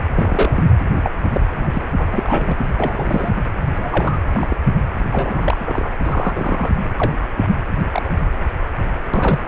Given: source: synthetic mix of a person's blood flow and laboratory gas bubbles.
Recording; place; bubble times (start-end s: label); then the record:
Doppler ultrasound of blood flow; precordium
0.15-0.67 s: bubbles
1.04-1.11 s: bubbles
1.32-1.41 s: bubbles
1.59-1.82 s: bubbles
1.96-2.08 s: bubbles
2.13-2.56 s: bubbles
2.77-3.32 s: bubbles
3.77-4.19 s: bubbles
4.33-4.57 s: bubbles
5.12-5.92 s: bubbles
6.05-6.71 s: bubbles
6.98-7.12 s: bubbles
7.35-7.46 s: bubbles
7.92-8.02 s: bubbles
8.04-8.10 s: bubbles
9.13-9.46 s: bubbles
From the record:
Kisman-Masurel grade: 242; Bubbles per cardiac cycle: several, 3 to 8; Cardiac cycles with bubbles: 100%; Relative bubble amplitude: moderate (0.250 to 0.450); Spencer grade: 3 (all of the cardiac periods contain showers or single bubble signals, but not dominating or overriding the cardiac motion signals); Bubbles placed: anywhere in the cardiac cycle